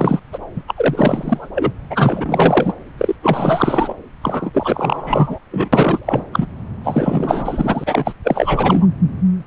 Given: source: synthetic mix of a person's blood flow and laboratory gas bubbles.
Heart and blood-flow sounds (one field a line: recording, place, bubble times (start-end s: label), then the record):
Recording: Doppler ultrasound of blood flow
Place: subclavian vein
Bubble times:
0.00-0.20 s: bubbles
0.32-0.38 s: bubbles
0.56-0.62 s: bubbles
0.67-1.50 s: bubbles
1.55-1.72 s: bubbles
1.90-2.73 s: bubbles
2.98-3.15 s: bubbles
3.22-3.94 s: bubbles
4.21-4.50 s: bubbles
4.53-5.38 s: bubbles
5.51-5.69 s: bubbles
5.72-6.25 s: bubbles
6.32-6.47 s: bubbles
6.84-8.13 s: bubbles
8.23-8.87 s: bubbles
From the record:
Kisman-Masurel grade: 444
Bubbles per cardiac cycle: continuous sound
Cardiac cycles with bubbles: 100%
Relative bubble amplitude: maximal (0.775 to 0.999)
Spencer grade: 4 (maximum detectable bubble signal sounding continuously throughout systole and diastole of every cardiac period, and overriding the amplitude of the normal cardiac signals)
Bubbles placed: anywhere in the cardiac cycle